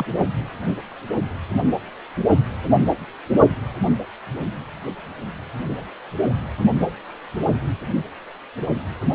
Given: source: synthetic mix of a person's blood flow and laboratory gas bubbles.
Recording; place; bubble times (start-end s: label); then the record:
Doppler ultrasound of blood flow; precordium
0.00-0.05 s: bubbles
0.18-0.24 s: bubbles
From the record:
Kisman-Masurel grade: 211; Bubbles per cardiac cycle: several, 3 to 8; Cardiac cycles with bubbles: 1 to 10%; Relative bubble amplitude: barely perceptible (0.100 to 0.250); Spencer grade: 1 (occasional bubble signal discernible with the cardiac motion signal, with majority of cardiac periods free of bubbles); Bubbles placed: only in the low amplitude regions of the cardiac cycle